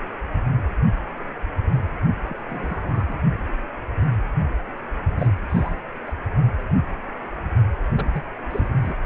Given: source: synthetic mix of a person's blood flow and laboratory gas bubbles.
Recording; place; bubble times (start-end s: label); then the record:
Doppler ultrasound of blood flow; precordium
2.29-2.35 s: bubbles
2.50-3.17 s: bubbles
5.18-5.32 s: bubbles
5.48-5.73 s: bubbles
6.06-6.13 s: bubbles
7.95-8.08 s: bubbles
8.13-8.24 s: bubbles
8.51-8.75 s: bubbles
8.79-8.95 s: bubbles
From the record:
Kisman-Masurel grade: 221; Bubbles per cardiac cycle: several, 3 to 8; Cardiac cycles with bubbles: 10 to 50%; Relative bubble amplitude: barely perceptible (0.100 to 0.250); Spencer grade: 2 (many but less than half of the cardiac periods contain bubble signals, singularly or in groups); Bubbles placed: only in the low amplitude regions of the cardiac cycle